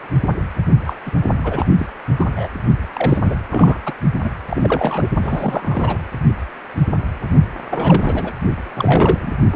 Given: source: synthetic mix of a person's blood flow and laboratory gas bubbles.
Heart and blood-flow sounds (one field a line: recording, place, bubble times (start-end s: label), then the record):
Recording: Doppler ultrasound of blood flow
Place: precordium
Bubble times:
0.86-0.93 s: bubbles
1.05-1.11 s: bubbles
1.44-1.67 s: bubbles
1.78-1.86 s: bubbles
2.17-2.25 s: bubbles
2.32-2.48 s: bubbles
2.94-3.34 s: bubbles
3.50-3.78 s: bubbles
3.85-3.93 s: bubbles
4.23-4.30 s: bubbles
4.47-5.09 s: bubbles
5.23-5.98 s: bubbles
7.71-8.31 s: bubbles
8.73-9.32 s: bubbles
9.53-9.56 s: bubbles
From the record:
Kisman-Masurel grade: 332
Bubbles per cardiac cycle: rolling drumbeat, 9 or more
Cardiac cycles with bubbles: 50 to 99%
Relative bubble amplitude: moderate (0.250 to 0.450)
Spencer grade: 3 (all of the cardiac periods contain showers or single bubble signals, but not dominating or overriding the cardiac motion signals)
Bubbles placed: only in the low amplitude regions of the cardiac cycle